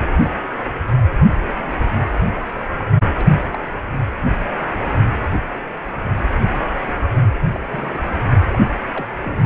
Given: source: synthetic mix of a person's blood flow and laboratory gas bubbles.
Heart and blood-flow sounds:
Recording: Doppler ultrasound of blood flow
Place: precordium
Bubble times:
2.14-2.23 s: bubbles
2.37-2.40 s: bubbles
2.79-2.85 s: bubbles
3.15-3.27 s: bubbles
3.38-3.62 s: bubbles
7.55-7.60 s: bubbles
7.71-8.01 s: bubbles
8.11-8.17 s: bubbles
8.52-8.59 s: bubbles
8.93-9.06 s: bubbles
9.21-9.46 s: bubbles
From the record:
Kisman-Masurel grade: 221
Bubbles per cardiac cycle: several, 3 to 8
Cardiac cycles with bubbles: 10 to 50%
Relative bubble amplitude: barely perceptible (0.100 to 0.250)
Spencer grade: 2 (many but less than half of the cardiac periods contain bubble signals, singularly or in groups)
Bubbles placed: anywhere in the cardiac cycle

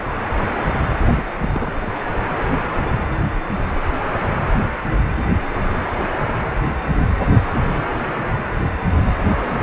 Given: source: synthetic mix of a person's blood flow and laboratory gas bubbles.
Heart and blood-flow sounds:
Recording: Doppler ultrasound of blood flow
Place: precordium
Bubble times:
1.14-1.22 s: bubbles
1.40-1.81 s: bubbles
From the record:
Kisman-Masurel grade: 112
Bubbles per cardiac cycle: 1 to 2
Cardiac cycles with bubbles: 1 to 10%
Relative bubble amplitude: moderate (0.250 to 0.450)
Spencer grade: 1 (occasional bubble signal discernible with the cardiac motion signal, with majority of cardiac periods free of bubbles)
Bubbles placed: anywhere in the cardiac cycle

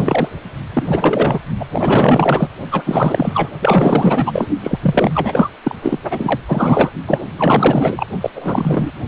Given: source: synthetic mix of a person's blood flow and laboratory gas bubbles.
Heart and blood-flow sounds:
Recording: Doppler ultrasound of blood flow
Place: precordium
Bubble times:
0.00-0.29 s: bubbles
0.73-1.39 s: bubbles
1.59-1.66 s: bubbles
1.72-2.48 s: bubbles
2.71-3.49 s: bubbles
3.61-4.47 s: bubbles
4.63-4.79 s: bubbles
4.81-5.50 s: bubbles
5.63-5.75 s: bubbles
5.82-5.99 s: bubbles
6.10-6.40 s: bubbles
6.48-6.91 s: bubbles
7.06-7.19 s: bubbles
7.38-8.07 s: bubbles
8.21-8.30 s: bubbles
8.35-8.91 s: bubbles
From the record:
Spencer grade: 4 (maximum detectable bubble signal sounding continuously throughout systole and diastole of every cardiac period, and overriding the amplitude of the normal cardiac signals)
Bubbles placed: only in the low amplitude regions of the cardiac cycle

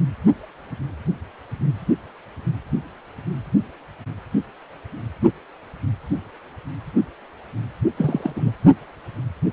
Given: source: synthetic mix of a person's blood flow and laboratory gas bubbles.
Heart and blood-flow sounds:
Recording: Doppler ultrasound of blood flow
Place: precordium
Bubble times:
7.97-8.52 s: bubbles
From the record:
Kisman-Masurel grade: 212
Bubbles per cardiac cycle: several, 3 to 8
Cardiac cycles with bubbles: 1 to 10%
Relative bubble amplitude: moderate (0.250 to 0.450)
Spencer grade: 1 (occasional bubble signal discernible with the cardiac motion signal, with majority of cardiac periods free of bubbles)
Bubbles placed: only in the low amplitude regions of the cardiac cycle

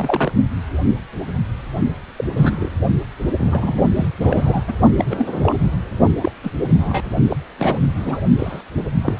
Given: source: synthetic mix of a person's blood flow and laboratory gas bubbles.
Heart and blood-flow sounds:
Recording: Doppler ultrasound of blood flow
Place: precordium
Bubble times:
0.00-0.32 s: bubbles
2.17-2.25 s: bubbles
2.36-2.69 s: bubbles
3.37-3.82 s: bubbles
3.96-4.08 s: bubbles
4.21-4.63 s: bubbles
4.67-4.73 s: bubbles
4.97-5.05 s: bubbles
5.10-5.56 s: bubbles
6.21-6.32 s: bubbles
6.43-6.50 s: bubbles
6.67-7.02 s: bubbles
7.29-7.37 s: bubbles
7.58-7.79 s: bubbles
7.97-8.22 s: bubbles
8.38-8.61 s: bubbles
9.01-9.16 s: bubbles
From the record:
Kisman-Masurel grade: 232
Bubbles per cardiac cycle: several, 3 to 8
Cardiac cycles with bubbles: 50 to 99%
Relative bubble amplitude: moderate (0.250 to 0.450)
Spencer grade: 3 (all of the cardiac periods contain showers or single bubble signals, but not dominating or overriding the cardiac motion signals)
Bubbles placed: only in the low amplitude regions of the cardiac cycle

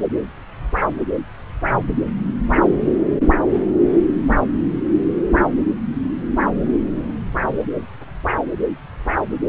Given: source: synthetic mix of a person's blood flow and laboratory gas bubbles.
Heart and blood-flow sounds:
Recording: Doppler ultrasound of blood flow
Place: subclavian vein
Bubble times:
no bubbles
From the record:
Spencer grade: 0 (complete lack of bubble signals)

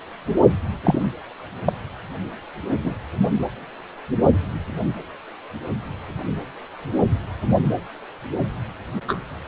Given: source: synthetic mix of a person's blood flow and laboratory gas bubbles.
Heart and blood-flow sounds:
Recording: Doppler ultrasound of blood flow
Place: precordium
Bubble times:
0.83-1.05 s: bubbles
1.66-1.72 s: bubbles
2.83-2.94 s: bubbles
9.07-9.19 s: bubbles
From the record:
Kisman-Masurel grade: 123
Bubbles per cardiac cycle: 1 to 2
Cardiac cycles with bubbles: 10 to 50%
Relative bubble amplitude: loud (0.450 to 0.775)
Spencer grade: 2 (many but less than half of the cardiac periods contain bubble signals, singularly or in groups)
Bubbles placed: anywhere in the cardiac cycle

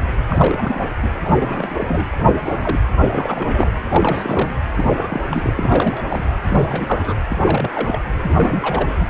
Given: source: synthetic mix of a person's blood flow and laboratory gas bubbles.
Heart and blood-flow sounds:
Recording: Doppler ultrasound of blood flow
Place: precordium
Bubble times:
0.00-0.04 s: bubbles
0.29-0.88 s: bubbles
1.02-1.08 s: bubbles
1.24-1.31 s: bubbles
1.36-2.07 s: bubbles
2.18-2.79 s: bubbles
3.04-3.72 s: bubbles
3.84-4.55 s: bubbles
4.76-5.21 s: bubbles
5.29-5.53 s: bubbles
5.57-6.03 s: bubbles
6.08-6.36 s: bubbles
6.44-7.20 s: bubbles
7.30-7.38 s: bubbles
7.44-7.99 s: bubbles
8.23-9.06 s: bubbles
From the record:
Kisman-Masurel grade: 332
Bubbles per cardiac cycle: rolling drumbeat, 9 or more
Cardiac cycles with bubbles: 50 to 99%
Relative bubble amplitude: moderate (0.250 to 0.450)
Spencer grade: 3 (all of the cardiac periods contain showers or single bubble signals, but not dominating or overriding the cardiac motion signals)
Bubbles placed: anywhere in the cardiac cycle

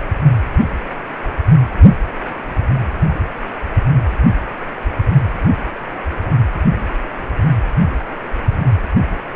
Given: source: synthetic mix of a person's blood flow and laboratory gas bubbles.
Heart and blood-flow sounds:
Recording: Doppler ultrasound of blood flow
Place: precordium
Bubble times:
no bubbles
From the record:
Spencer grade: 0 (complete lack of bubble signals)

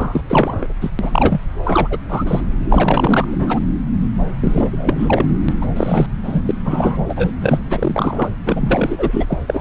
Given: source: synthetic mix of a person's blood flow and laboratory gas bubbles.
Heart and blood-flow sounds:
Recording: Doppler ultrasound of blood flow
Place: subclavian vein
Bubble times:
0.00-0.21 s: bubbles
0.27-0.67 s: bubbles
0.81-0.91 s: bubbles
0.99-1.40 s: bubbles
1.65-1.98 s: bubbles
2.09-2.41 s: bubbles
2.70-3.28 s: bubbles
3.31-3.61 s: bubbles
4.40-5.25 s: bubbles
5.49-5.53 s: bubbles
5.61-5.67 s: bubbles
5.76-6.07 s: bubbles
6.23-6.42 s: bubbles
6.46-6.51 s: bubbles
6.65-6.97 s: bubbles
7.08-7.32 s: bubbles
7.41-7.60 s: bubbles
7.70-8.29 s: bubbles
8.46-9.26 s: bubbles
9.28-9.38 s: bubbles
9.47-9.61 s: bubbles
From the record:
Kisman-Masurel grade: 342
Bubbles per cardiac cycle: rolling drumbeat, 9 or more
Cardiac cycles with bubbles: 100%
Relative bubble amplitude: moderate (0.250 to 0.450)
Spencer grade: 3 (all of the cardiac periods contain showers or single bubble signals, but not dominating or overriding the cardiac motion signals)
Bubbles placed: anywhere in the cardiac cycle

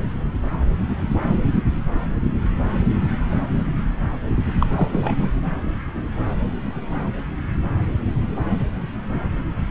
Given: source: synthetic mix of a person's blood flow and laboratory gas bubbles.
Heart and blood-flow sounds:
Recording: Doppler ultrasound of blood flow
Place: subclavian vein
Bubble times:
4.59-4.66 s: bubbles
4.77-4.89 s: bubbles
4.92-5.29 s: bubbles
From the record:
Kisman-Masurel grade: 212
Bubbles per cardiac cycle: several, 3 to 8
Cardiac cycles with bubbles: 1 to 10%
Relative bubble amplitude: moderate (0.250 to 0.450)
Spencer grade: 1 (occasional bubble signal discernible with the cardiac motion signal, with majority of cardiac periods free of bubbles)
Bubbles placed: anywhere in the cardiac cycle

